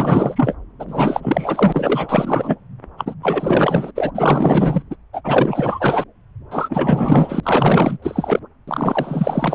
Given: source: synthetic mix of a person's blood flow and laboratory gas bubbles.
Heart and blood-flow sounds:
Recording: Doppler ultrasound of blood flow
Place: subclavian vein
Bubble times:
0.00-0.55 s: bubbles
0.79-0.85 s: bubbles
0.88-2.56 s: bubbles
2.97-3.15 s: bubbles
3.23-3.92 s: bubbles
3.95-4.12 s: bubbles
4.15-4.83 s: bubbles
4.91-4.96 s: bubbles
5.13-5.21 s: bubbles
5.24-6.04 s: bubbles
6.50-7.40 s: bubbles
7.43-7.98 s: bubbles
8.02-8.39 s: bubbles
8.67-9.55 s: bubbles
From the record:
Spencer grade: 4 (maximum detectable bubble signal sounding continuously throughout systole and diastole of every cardiac period, and overriding the amplitude of the normal cardiac signals)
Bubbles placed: anywhere in the cardiac cycle

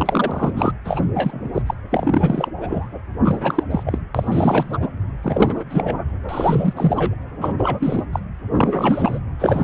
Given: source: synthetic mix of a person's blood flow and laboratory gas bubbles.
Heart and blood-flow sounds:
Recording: Doppler ultrasound of blood flow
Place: precordium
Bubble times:
0.00-0.72 s: bubbles
0.84-1.06 s: bubbles
1.15-1.62 s: bubbles
1.66-1.74 s: bubbles
1.91-2.48 s: bubbles
2.54-2.86 s: bubbles
3.24-3.64 s: bubbles
3.71-3.99 s: bubbles
4.15-4.78 s: bubbles
4.80-4.88 s: bubbles
5.23-5.63 s: bubbles
5.70-5.99 s: bubbles
6.29-7.15 s: bubbles
7.41-7.53 s: bubbles
7.58-8.05 s: bubbles
8.12-8.20 s: bubbles
8.54-9.19 s: bubbles
9.39-9.64 s: bubbles
From the record:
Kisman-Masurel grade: 343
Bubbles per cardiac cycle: rolling drumbeat, 9 or more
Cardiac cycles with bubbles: 100%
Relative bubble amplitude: loud (0.450 to 0.775)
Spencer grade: 3 (all of the cardiac periods contain showers or single bubble signals, but not dominating or overriding the cardiac motion signals)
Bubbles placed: anywhere in the cardiac cycle

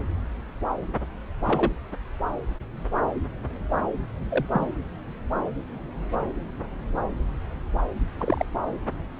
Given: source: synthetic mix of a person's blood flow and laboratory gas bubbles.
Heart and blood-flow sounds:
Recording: Doppler ultrasound of blood flow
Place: subclavian vein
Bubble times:
1.45-1.72 s: bubbles
4.29-4.46 s: bubbles
4.51-4.67 s: bubbles
8.18-8.46 s: bubbles
From the record:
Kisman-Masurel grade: 122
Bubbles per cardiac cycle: 1 to 2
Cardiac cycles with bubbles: 10 to 50%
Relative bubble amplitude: moderate (0.250 to 0.450)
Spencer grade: 2 (many but less than half of the cardiac periods contain bubble signals, singularly or in groups)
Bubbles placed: anywhere in the cardiac cycle

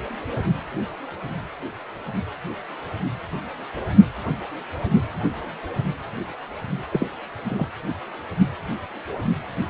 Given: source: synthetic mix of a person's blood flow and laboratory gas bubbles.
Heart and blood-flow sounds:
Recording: Doppler ultrasound of blood flow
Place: precordium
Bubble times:
6.91-7.08 s: bubbles
7.49-7.67 s: bubbles
From the record:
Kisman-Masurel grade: 112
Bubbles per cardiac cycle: 1 to 2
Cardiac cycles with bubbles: 1 to 10%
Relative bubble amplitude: moderate (0.250 to 0.450)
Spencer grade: 1 (occasional bubble signal discernible with the cardiac motion signal, with majority of cardiac periods free of bubbles)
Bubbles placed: anywhere in the cardiac cycle

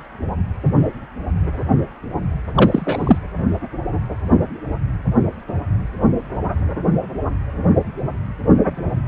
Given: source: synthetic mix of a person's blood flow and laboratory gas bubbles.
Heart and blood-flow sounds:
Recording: Doppler ultrasound of blood flow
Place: precordium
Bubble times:
2.54-3.19 s: bubbles
From the record:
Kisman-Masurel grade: 213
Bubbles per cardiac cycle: several, 3 to 8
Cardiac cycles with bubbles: 1 to 10%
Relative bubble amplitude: loud (0.450 to 0.775)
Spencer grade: 1 (occasional bubble signal discernible with the cardiac motion signal, with majority of cardiac periods free of bubbles)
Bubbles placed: anywhere in the cardiac cycle

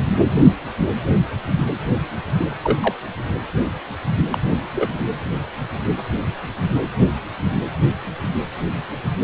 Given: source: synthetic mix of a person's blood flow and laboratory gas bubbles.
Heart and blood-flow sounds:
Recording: Doppler ultrasound of blood flow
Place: precordium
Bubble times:
2.39-2.52 s: bubbles
2.62-2.94 s: bubbles
4.30-4.40 s: bubbles
4.75-4.90 s: bubbles
From the record:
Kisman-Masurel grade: 122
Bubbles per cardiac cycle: 1 to 2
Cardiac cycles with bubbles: 10 to 50%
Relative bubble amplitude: moderate (0.250 to 0.450)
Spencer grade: 2 (many but less than half of the cardiac periods contain bubble signals, singularly or in groups)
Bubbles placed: anywhere in the cardiac cycle

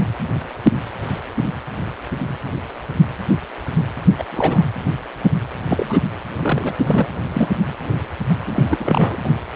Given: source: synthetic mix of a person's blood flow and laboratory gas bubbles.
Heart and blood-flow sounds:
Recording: Doppler ultrasound of blood flow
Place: precordium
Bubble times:
4.18-4.25 s: bubbles
4.31-4.64 s: bubbles
5.70-6.01 s: bubbles
6.38-7.07 s: bubbles
7.33-7.49 s: bubbles
7.87-7.96 s: bubbles
8.46-9.18 s: bubbles
9.23-9.30 s: bubbles
From the record:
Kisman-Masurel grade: 222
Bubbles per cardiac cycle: several, 3 to 8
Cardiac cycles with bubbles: 10 to 50%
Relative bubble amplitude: moderate (0.250 to 0.450)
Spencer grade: 2 (many but less than half of the cardiac periods contain bubble signals, singularly or in groups)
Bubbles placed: anywhere in the cardiac cycle

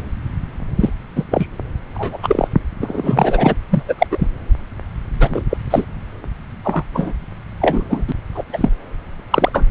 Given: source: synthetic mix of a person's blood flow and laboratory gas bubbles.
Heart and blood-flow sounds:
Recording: Doppler ultrasound of blood flow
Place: subclavian vein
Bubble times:
0.79-0.89 s: bubbles
1.16-1.25 s: bubbles
1.31-1.47 s: bubbles
1.95-2.18 s: bubbles
2.23-2.48 s: bubbles
2.81-3.55 s: bubbles
3.70-3.83 s: bubbles
3.88-3.95 s: bubbles
3.98-4.07 s: bubbles
4.11-4.28 s: bubbles
5.20-5.42 s: bubbles
5.50-5.58 s: bubbles
5.70-5.85 s: bubbles
6.63-6.83 s: bubbles
6.94-7.12 s: bubbles
7.61-7.84 s: bubbles
7.89-8.05 s: bubbles
8.07-8.12 s: bubbles
8.35-8.44 s: bubbles
8.53-8.69 s: bubbles
9.30-9.51 s: bubbles
9.53-9.64 s: bubbles
From the record:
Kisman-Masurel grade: 243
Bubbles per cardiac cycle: several, 3 to 8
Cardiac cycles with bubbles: 100%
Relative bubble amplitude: loud (0.450 to 0.775)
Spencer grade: 3 (all of the cardiac periods contain showers or single bubble signals, but not dominating or overriding the cardiac motion signals)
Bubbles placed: anywhere in the cardiac cycle

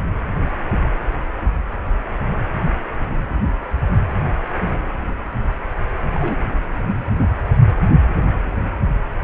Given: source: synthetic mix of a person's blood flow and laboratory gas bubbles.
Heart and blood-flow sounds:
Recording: Doppler ultrasound of blood flow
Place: precordium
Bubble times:
6.15-6.37 s: bubbles
From the record:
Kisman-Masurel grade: 112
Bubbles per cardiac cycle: 1 to 2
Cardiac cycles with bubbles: 1 to 10%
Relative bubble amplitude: moderate (0.250 to 0.450)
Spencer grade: 1 (occasional bubble signal discernible with the cardiac motion signal, with majority of cardiac periods free of bubbles)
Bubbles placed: anywhere in the cardiac cycle

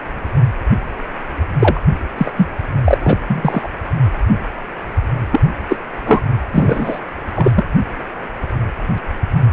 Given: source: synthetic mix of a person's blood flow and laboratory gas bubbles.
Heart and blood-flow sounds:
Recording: Doppler ultrasound of blood flow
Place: precordium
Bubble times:
1.59-1.80 s: bubbles
2.17-2.31 s: bubbles
2.36-2.47 s: bubbles
2.84-2.97 s: bubbles
3.00-3.17 s: bubbles
3.27-3.69 s: bubbles
5.32-5.41 s: bubbles
5.69-5.77 s: bubbles
6.06-6.22 s: bubbles
6.53-6.99 s: bubbles
7.36-7.52 s: bubbles
7.56-7.67 s: bubbles
From the record:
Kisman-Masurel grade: 223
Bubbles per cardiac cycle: several, 3 to 8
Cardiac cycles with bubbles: 10 to 50%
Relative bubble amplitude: loud (0.450 to 0.775)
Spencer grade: 2 (many but less than half of the cardiac periods contain bubble signals, singularly or in groups)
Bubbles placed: anywhere in the cardiac cycle

